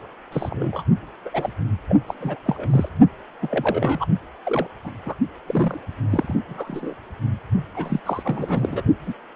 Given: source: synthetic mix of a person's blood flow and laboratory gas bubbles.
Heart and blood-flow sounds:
Doppler ultrasound of blood flow; precordium
0.32-0.83 s: bubbles
1.25-1.30 s: bubbles
1.33-1.54 s: bubbles
1.89-1.97 s: bubbles
2.08-2.14 s: bubbles
2.21-2.39 s: bubbles
2.45-2.89 s: bubbles
3.42-4.05 s: bubbles
4.45-4.67 s: bubbles
4.84-4.91 s: bubbles
5.06-5.15 s: bubbles
5.47-5.80 s: bubbles
6.10-6.34 s: bubbles
6.49-6.94 s: bubbles
7.74-8.00 s: bubbles
8.05-8.82 s: bubbles
9.06-9.13 s: bubbles
From the record:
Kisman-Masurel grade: 242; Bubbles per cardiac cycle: several, 3 to 8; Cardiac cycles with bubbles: 100%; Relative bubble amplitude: moderate (0.250 to 0.450); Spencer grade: 3 (all of the cardiac periods contain showers or single bubble signals, but not dominating or overriding the cardiac motion signals); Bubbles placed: only in the low amplitude regions of the cardiac cycle

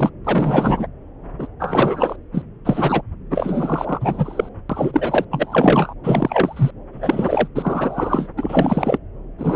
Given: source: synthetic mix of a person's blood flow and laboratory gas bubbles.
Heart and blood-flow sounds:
Doppler ultrasound of blood flow; subclavian vein
0.00-0.10 s: bubbles
0.24-0.87 s: bubbles
1.39-1.47 s: bubbles
1.59-2.16 s: bubbles
2.33-2.44 s: bubbles
2.65-3.02 s: bubbles
3.30-4.49 s: bubbles
4.69-5.25 s: bubbles
5.30-5.94 s: bubbles
6.04-6.71 s: bubbles
6.92-7.47 s: bubbles
7.55-8.28 s: bubbles
8.37-8.98 s: bubbles
9.38-9.56 s: bubbles
From the record:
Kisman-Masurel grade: 343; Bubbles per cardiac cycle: rolling drumbeat, 9 or more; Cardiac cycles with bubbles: 100%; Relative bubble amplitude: loud (0.450 to 0.775); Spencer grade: 3 (all of the cardiac periods contain showers or single bubble signals, but not dominating or overriding the cardiac motion signals); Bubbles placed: anywhere in the cardiac cycle

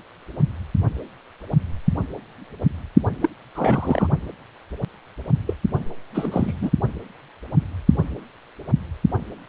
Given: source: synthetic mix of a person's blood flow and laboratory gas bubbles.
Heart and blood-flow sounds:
Doppler ultrasound of blood flow; precordium
3.21-3.29 s: bubbles
3.55-4.07 s: bubbles
5.46-5.54 s: bubbles
6.14-6.71 s: bubbles
From the record:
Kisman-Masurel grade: 222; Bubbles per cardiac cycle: several, 3 to 8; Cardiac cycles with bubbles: 10 to 50%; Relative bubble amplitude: moderate (0.250 to 0.450); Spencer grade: 2 (many but less than half of the cardiac periods contain bubble signals, singularly or in groups); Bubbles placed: only in the low amplitude regions of the cardiac cycle

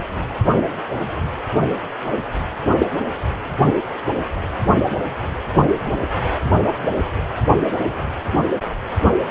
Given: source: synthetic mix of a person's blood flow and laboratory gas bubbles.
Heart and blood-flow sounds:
Doppler ultrasound of blood flow; precordium
2.78-2.86 s: bubbles
3.66-3.75 s: bubbles
From the record:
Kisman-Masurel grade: 123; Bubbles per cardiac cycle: 1 to 2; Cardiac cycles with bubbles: 10 to 50%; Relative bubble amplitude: loud (0.450 to 0.775); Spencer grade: 2 (many but less than half of the cardiac periods contain bubble signals, singularly or in groups); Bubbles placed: anywhere in the cardiac cycle

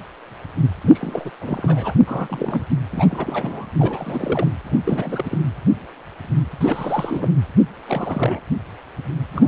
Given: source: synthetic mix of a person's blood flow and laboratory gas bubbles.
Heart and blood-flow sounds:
Doppler ultrasound of blood flow; precordium
0.81-1.30 s: bubbles
1.40-1.94 s: bubbles
2.06-2.62 s: bubbles
2.69-2.79 s: bubbles
2.92-3.67 s: bubbles
3.79-4.51 s: bubbles
4.64-4.79 s: bubbles
4.86-5.38 s: bubbles
6.61-7.31 s: bubbles
7.88-8.41 s: bubbles
9.33-9.48 s: bubbles
From the record:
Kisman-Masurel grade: 332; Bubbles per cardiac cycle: rolling drumbeat, 9 or more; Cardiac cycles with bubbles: 50 to 99%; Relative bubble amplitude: moderate (0.250 to 0.450); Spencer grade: 3 (all of the cardiac periods contain showers or single bubble signals, but not dominating or overriding the cardiac motion signals); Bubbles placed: anywhere in the cardiac cycle

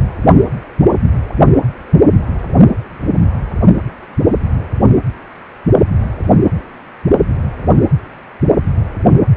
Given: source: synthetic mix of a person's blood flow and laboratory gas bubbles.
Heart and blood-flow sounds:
Doppler ultrasound of blood flow; precordium
no bubbles
From the record:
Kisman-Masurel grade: 000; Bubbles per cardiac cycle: 0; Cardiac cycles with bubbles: 0%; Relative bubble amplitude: no bubbles discernible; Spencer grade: 0 (complete lack of bubble signals)

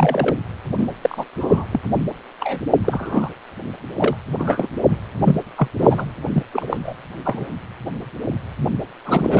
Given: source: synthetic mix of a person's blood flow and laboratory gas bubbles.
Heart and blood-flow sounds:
Doppler ultrasound of blood flow; precordium
0.00-0.36 s: bubbles
0.77-0.88 s: bubbles
1.02-1.25 s: bubbles
1.36-1.66 s: bubbles
1.71-1.81 s: bubbles
2.40-2.59 s: bubbles
2.84-3.29 s: bubbles
3.98-4.17 s: bubbles
4.38-4.68 s: bubbles
4.90-4.96 s: bubbles
5.25-5.36 s: bubbles
5.58-5.68 s: bubbles
5.78-6.05 s: bubbles
6.33-6.43 s: bubbles
6.53-6.77 s: bubbles
6.83-6.96 s: bubbles
7.25-7.46 s: bubbles
9.05-9.39 s: bubbles
From the record:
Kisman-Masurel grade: 242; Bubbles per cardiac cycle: several, 3 to 8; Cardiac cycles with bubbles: 100%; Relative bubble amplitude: moderate (0.250 to 0.450); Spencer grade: 3 (all of the cardiac periods contain showers or single bubble signals, but not dominating or overriding the cardiac motion signals); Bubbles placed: anywhere in the cardiac cycle

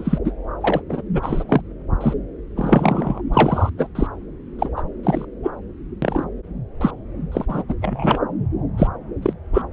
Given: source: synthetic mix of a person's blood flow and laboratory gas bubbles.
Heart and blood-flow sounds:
Doppler ultrasound of blood flow; subclavian vein
0.00-0.18 s: bubbles
0.24-0.33 s: bubbles
0.60-0.80 s: bubbles
0.89-1.02 s: bubbles
1.14-1.61 s: bubbles
2.00-2.13 s: bubbles
2.55-3.21 s: bubbles
3.33-3.69 s: bubbles
3.77-3.87 s: bubbles
3.95-4.07 s: bubbles
4.58-4.69 s: bubbles
4.76-4.83 s: bubbles
5.03-5.25 s: bubbles
5.43-5.51 s: bubbles
6.02-6.24 s: bubbles
6.81-6.91 s: bubbles
7.32-7.46 s: bubbles
7.49-7.62 s: bubbles
7.68-7.75 s: bubbles
7.82-8.19 s: bubbles
8.78-8.88 s: bubbles
9.22-9.33 s: bubbles
9.54-9.62 s: bubbles
From the record:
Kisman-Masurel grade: 242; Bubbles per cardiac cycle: several, 3 to 8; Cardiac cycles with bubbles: 100%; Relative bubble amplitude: moderate (0.250 to 0.450); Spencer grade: 3 (all of the cardiac periods contain showers or single bubble signals, but not dominating or overriding the cardiac motion signals); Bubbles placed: anywhere in the cardiac cycle

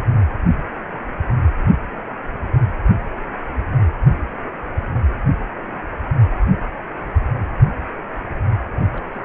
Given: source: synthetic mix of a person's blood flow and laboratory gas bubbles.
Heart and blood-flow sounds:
Doppler ultrasound of blood flow; precordium
8.77-9.04 s: bubbles
9.13-9.20 s: bubbles
From the record:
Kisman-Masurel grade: 211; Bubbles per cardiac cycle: several, 3 to 8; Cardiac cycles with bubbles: 1 to 10%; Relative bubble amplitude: barely perceptible (0.100 to 0.250); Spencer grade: 1 (occasional bubble signal discernible with the cardiac motion signal, with majority of cardiac periods free of bubbles); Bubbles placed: anywhere in the cardiac cycle

